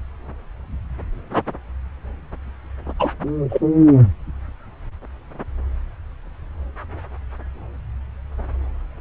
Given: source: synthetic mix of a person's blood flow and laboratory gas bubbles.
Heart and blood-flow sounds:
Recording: Doppler ultrasound of blood flow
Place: subclavian vein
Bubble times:
2.99-3.09 s: bubbles
3.49-3.61 s: bubbles
From the record:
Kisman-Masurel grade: 113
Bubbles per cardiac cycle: 1 to 2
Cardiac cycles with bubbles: 1 to 10%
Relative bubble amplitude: loud (0.450 to 0.775)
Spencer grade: 1 (occasional bubble signal discernible with the cardiac motion signal, with majority of cardiac periods free of bubbles)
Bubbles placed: anywhere in the cardiac cycle

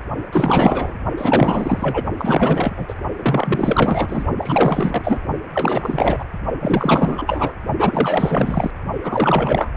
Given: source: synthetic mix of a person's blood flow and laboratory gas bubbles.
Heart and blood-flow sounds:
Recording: Doppler ultrasound of blood flow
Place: precordium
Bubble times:
0.33-0.94 s: bubbles
1.17-2.04 s: bubbles
2.17-2.94 s: bubbles
3.17-4.25 s: bubbles
4.38-5.19 s: bubbles
5.54-6.25 s: bubbles
6.60-7.53 s: bubbles
7.78-8.71 s: bubbles
9.04-9.70 s: bubbles
9.74-9.77 s: bubbles
From the record:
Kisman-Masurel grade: 444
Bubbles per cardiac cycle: continuous sound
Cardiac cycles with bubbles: 100%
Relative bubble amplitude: maximal (0.775 to 0.999)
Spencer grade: 4 (maximum detectable bubble signal sounding continuously throughout systole and diastole of every cardiac period, and overriding the amplitude of the normal cardiac signals)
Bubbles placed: only in the low amplitude regions of the cardiac cycle

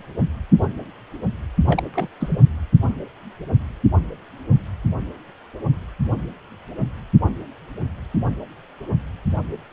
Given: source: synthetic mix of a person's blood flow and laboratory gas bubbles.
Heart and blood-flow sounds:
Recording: Doppler ultrasound of blood flow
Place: precordium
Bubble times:
1.66-1.83 s: bubbles
1.94-2.09 s: bubbles
2.20-2.40 s: bubbles
From the record:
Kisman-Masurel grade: 211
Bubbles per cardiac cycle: several, 3 to 8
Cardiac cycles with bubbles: 1 to 10%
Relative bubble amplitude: barely perceptible (0.100 to 0.250)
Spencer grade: 1 (occasional bubble signal discernible with the cardiac motion signal, with majority of cardiac periods free of bubbles)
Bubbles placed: anywhere in the cardiac cycle

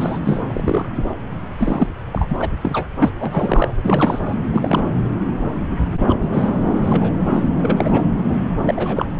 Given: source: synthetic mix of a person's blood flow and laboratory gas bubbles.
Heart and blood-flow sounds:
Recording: Doppler ultrasound of blood flow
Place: subclavian vein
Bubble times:
0.00-0.20 s: bubbles
0.25-0.43 s: bubbles
0.46-0.89 s: bubbles
1.58-1.90 s: bubbles
2.12-2.53 s: bubbles
2.61-2.88 s: bubbles
2.98-3.10 s: bubbles
3.19-3.68 s: bubbles
3.81-4.35 s: bubbles
4.52-4.84 s: bubbles
5.99-6.15 s: bubbles
6.22-6.29 s: bubbles
6.33-6.49 s: bubbles
6.81-7.12 s: bubbles
7.33-7.47 s: bubbles
7.60-8.04 s: bubbles
8.61-9.05 s: bubbles
From the record:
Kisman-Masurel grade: 232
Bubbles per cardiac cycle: several, 3 to 8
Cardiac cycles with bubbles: 50 to 99%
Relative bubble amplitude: moderate (0.250 to 0.450)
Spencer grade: 3 (all of the cardiac periods contain showers or single bubble signals, but not dominating or overriding the cardiac motion signals)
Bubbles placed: anywhere in the cardiac cycle

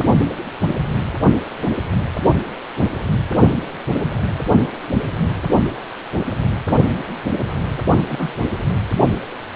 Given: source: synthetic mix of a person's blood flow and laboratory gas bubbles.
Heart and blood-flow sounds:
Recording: Doppler ultrasound of blood flow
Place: precordium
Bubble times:
8.08-8.33 s: bubbles
From the record:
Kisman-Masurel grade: 111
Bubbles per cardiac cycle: 1 to 2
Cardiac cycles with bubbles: 1 to 10%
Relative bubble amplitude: barely perceptible (0.100 to 0.250)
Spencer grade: 1 (occasional bubble signal discernible with the cardiac motion signal, with majority of cardiac periods free of bubbles)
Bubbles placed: only in the low amplitude regions of the cardiac cycle

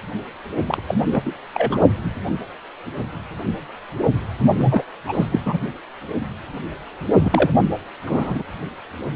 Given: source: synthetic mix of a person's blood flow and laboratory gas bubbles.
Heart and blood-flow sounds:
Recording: Doppler ultrasound of blood flow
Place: precordium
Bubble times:
0.67-0.82 s: bubbles
0.88-0.95 s: bubbles
1.10-1.21 s: bubbles
1.25-1.32 s: bubbles
1.54-1.80 s: bubbles
4.59-4.83 s: bubbles
5.07-5.26 s: bubbles
5.32-5.41 s: bubbles
5.46-5.57 s: bubbles
7.21-7.49 s: bubbles
8.06-8.43 s: bubbles
From the record:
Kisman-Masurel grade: 222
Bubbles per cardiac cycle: several, 3 to 8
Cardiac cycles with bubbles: 10 to 50%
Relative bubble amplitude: moderate (0.250 to 0.450)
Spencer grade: 2 (many but less than half of the cardiac periods contain bubble signals, singularly or in groups)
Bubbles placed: only in the low amplitude regions of the cardiac cycle

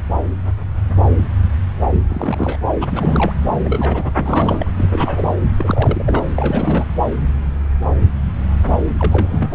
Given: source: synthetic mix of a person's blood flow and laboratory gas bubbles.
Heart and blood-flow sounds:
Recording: Doppler ultrasound of blood flow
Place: subclavian vein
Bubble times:
1.92-2.01 s: bubbles
2.09-2.57 s: bubbles
2.81-2.85 s: bubbles
2.90-3.33 s: bubbles
3.46-3.59 s: bubbles
3.65-4.70 s: bubbles
4.78-5.35 s: bubbles
5.58-6.29 s: bubbles
6.34-6.85 s: bubbles
8.99-9.54 s: bubbles
From the record:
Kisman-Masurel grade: 332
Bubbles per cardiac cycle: rolling drumbeat, 9 or more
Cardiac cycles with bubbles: 50 to 99%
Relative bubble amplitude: moderate (0.250 to 0.450)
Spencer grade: 3 (all of the cardiac periods contain showers or single bubble signals, but not dominating or overriding the cardiac motion signals)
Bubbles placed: anywhere in the cardiac cycle

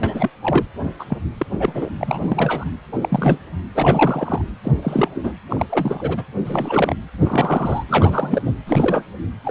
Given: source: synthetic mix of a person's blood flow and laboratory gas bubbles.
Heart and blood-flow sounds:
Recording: Doppler ultrasound of blood flow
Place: precordium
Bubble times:
0.03-0.30 s: bubbles
0.39-0.67 s: bubbles
0.98-1.04 s: bubbles
1.09-1.18 s: bubbles
1.38-1.46 s: bubbles
1.51-1.91 s: bubbles
1.98-2.69 s: bubbles
2.92-2.98 s: bubbles
3.01-3.38 s: bubbles
3.74-4.42 s: bubbles
4.63-4.72 s: bubbles
4.82-5.08 s: bubbles
5.15-5.34 s: bubbles
5.50-5.66 s: bubbles
5.69-6.25 s: bubbles
6.45-6.96 s: bubbles
7.21-7.83 s: bubbles
7.88-8.54 s: bubbles
8.66-9.04 s: bubbles
9.44-9.51 s: bubbles
From the record:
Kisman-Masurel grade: 343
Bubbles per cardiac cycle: rolling drumbeat, 9 or more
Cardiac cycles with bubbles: 100%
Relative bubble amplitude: loud (0.450 to 0.775)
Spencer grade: 3 (all of the cardiac periods contain showers or single bubble signals, but not dominating or overriding the cardiac motion signals)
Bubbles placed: anywhere in the cardiac cycle

